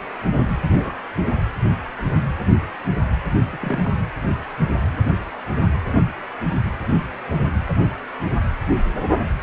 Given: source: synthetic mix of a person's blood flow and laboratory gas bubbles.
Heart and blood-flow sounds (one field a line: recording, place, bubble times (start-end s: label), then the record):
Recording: Doppler ultrasound of blood flow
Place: precordium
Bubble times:
0.68-0.92 s: bubbles
1.17-1.27 s: bubbles
3.53-3.58 s: bubbles
3.61-3.80 s: bubbles
3.85-3.89 s: bubbles
From the record:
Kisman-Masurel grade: 221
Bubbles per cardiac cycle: several, 3 to 8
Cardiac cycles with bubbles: 10 to 50%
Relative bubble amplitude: barely perceptible (0.100 to 0.250)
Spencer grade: 2 (many but less than half of the cardiac periods contain bubble signals, singularly or in groups)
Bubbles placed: anywhere in the cardiac cycle